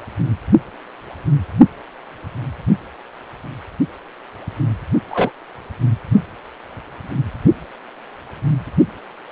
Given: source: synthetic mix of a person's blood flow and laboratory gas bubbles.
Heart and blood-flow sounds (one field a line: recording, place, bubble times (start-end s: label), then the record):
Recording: Doppler ultrasound of blood flow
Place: precordium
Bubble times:
5.11-5.31 s: bubbles
From the record:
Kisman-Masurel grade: 113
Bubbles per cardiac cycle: 1 to 2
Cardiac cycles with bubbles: 1 to 10%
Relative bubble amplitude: loud (0.450 to 0.775)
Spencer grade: 1 (occasional bubble signal discernible with the cardiac motion signal, with majority of cardiac periods free of bubbles)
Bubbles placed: only in the low amplitude regions of the cardiac cycle